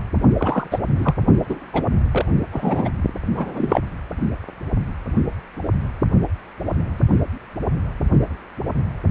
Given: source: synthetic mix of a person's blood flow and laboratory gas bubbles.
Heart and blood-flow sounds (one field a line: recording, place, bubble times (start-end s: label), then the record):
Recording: Doppler ultrasound of blood flow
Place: precordium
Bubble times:
0.38-0.68 s: bubbles
0.71-0.79 s: bubbles
0.88-1.15 s: bubbles
1.49-1.59 s: bubbles
1.73-1.83 s: bubbles
2.12-2.25 s: bubbles
2.52-2.89 s: bubbles
3.35-3.81 s: bubbles
From the record:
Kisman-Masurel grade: 232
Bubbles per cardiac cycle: several, 3 to 8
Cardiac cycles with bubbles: 50 to 99%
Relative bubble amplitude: moderate (0.250 to 0.450)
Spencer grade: 3 (all of the cardiac periods contain showers or single bubble signals, but not dominating or overriding the cardiac motion signals)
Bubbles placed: only in the low amplitude regions of the cardiac cycle